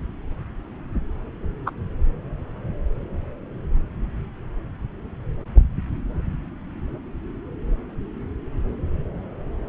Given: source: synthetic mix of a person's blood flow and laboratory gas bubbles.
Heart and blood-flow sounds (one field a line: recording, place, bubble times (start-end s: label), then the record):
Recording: Doppler ultrasound of blood flow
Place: subclavian vein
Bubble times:
1.66-1.70 s: bubbles
From the record:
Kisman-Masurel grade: 113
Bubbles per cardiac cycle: 1 to 2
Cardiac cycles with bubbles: 1 to 10%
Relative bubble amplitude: loud (0.450 to 0.775)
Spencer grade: 1 (occasional bubble signal discernible with the cardiac motion signal, with majority of cardiac periods free of bubbles)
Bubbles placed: anywhere in the cardiac cycle